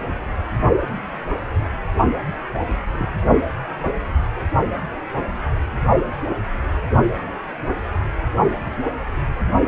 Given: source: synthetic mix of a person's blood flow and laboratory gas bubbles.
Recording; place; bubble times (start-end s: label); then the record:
Doppler ultrasound of blood flow; precordium
2.53-2.58 s: bubbles
2.91-2.97 s: bubbles
3.00-3.11 s: bubbles
From the record:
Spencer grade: 1 (occasional bubble signal discernible with the cardiac motion signal, with majority of cardiac periods free of bubbles); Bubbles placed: only in the low amplitude regions of the cardiac cycle